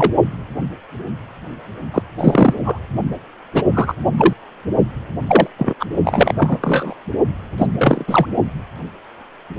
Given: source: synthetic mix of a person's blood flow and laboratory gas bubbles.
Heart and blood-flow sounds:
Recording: Doppler ultrasound of blood flow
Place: precordium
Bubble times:
0.00-0.11 s: bubbles
1.93-2.02 s: bubbles
2.17-2.54 s: bubbles
2.65-2.79 s: bubbles
3.54-3.63 s: bubbles
3.73-3.95 s: bubbles
4.17-4.33 s: bubbles
5.27-5.47 s: bubbles
5.58-5.74 s: bubbles
5.79-5.86 s: bubbles
6.04-6.33 s: bubbles
6.38-6.58 s: bubbles
6.62-6.94 s: bubbles
7.58-7.67 s: bubbles
7.79-8.04 s: bubbles
8.07-8.27 s: bubbles
From the record:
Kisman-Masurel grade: 233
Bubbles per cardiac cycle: several, 3 to 8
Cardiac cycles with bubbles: 50 to 99%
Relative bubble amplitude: loud (0.450 to 0.775)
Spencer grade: 3 (all of the cardiac periods contain showers or single bubble signals, but not dominating or overriding the cardiac motion signals)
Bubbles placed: only in the low amplitude regions of the cardiac cycle

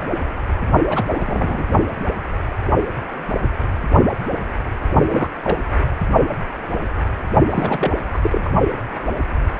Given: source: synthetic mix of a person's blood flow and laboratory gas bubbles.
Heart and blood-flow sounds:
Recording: Doppler ultrasound of blood flow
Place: precordium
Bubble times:
0.90-1.03 s: bubbles
1.15-1.64 s: bubbles
5.07-5.29 s: bubbles
5.44-5.57 s: bubbles
7.51-7.92 s: bubbles
8.13-8.19 s: bubbles
8.23-8.49 s: bubbles
From the record:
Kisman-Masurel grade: 232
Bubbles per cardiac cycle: several, 3 to 8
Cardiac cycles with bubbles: 50 to 99%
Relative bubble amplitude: moderate (0.250 to 0.450)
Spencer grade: 3 (all of the cardiac periods contain showers or single bubble signals, but not dominating or overriding the cardiac motion signals)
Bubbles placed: only in the low amplitude regions of the cardiac cycle

